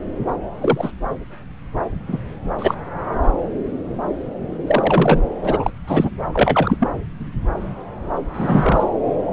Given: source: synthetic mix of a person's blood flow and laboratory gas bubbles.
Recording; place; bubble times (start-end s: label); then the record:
Doppler ultrasound of blood flow; subclavian vein
0.61-0.92 s: bubbles
2.08-2.18 s: bubbles
2.58-2.75 s: bubbles
4.67-5.24 s: bubbles
5.42-5.71 s: bubbles
5.88-6.11 s: bubbles
6.33-6.88 s: bubbles
8.34-8.84 s: bubbles
From the record:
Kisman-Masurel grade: 223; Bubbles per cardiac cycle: several, 3 to 8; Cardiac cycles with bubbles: 10 to 50%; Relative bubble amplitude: loud (0.450 to 0.775); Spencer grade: 2 (many but less than half of the cardiac periods contain bubble signals, singularly or in groups); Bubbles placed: anywhere in the cardiac cycle